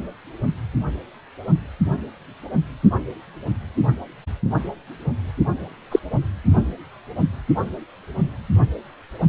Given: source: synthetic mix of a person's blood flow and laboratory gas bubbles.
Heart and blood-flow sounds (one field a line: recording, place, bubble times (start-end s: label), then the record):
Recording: Doppler ultrasound of blood flow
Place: precordium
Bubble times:
5.92-6.00 s: bubbles
From the record:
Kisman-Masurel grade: 123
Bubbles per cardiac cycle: 1 to 2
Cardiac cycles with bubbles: 10 to 50%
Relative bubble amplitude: loud (0.450 to 0.775)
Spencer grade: 2 (many but less than half of the cardiac periods contain bubble signals, singularly or in groups)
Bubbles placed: only in the low amplitude regions of the cardiac cycle